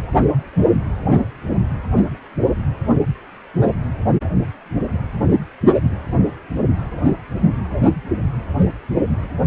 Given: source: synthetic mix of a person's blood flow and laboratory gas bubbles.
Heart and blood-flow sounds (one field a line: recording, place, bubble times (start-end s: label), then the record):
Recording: Doppler ultrasound of blood flow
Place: precordium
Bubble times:
no bubbles
From the record:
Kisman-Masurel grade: 000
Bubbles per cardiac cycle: 0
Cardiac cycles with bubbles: 0%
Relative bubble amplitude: no bubbles discernible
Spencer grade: 0 (complete lack of bubble signals)